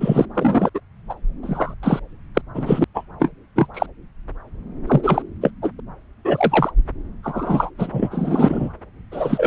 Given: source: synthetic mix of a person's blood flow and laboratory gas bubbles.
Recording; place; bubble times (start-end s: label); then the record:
Doppler ultrasound of blood flow; subclavian vein
0.00-0.26 s: bubbles
0.34-0.70 s: bubbles
0.74-0.80 s: bubbles
1.09-1.15 s: bubbles
1.43-1.74 s: bubbles
1.83-2.00 s: bubbles
2.34-2.42 s: bubbles
2.54-2.84 s: bubbles
2.94-3.05 s: bubbles
3.19-3.31 s: bubbles
3.56-3.67 s: bubbles
3.74-3.86 s: bubbles
4.87-5.22 s: bubbles
5.41-5.51 s: bubbles
5.62-5.71 s: bubbles
6.25-6.71 s: bubbles
7.23-7.70 s: bubbles
7.78-8.70 s: bubbles
9.11-9.47 s: bubbles
From the record:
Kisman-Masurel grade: 233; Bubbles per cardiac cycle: several, 3 to 8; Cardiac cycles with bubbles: 50 to 99%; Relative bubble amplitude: loud (0.450 to 0.775); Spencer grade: 3 (all of the cardiac periods contain showers or single bubble signals, but not dominating or overriding the cardiac motion signals); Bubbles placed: anywhere in the cardiac cycle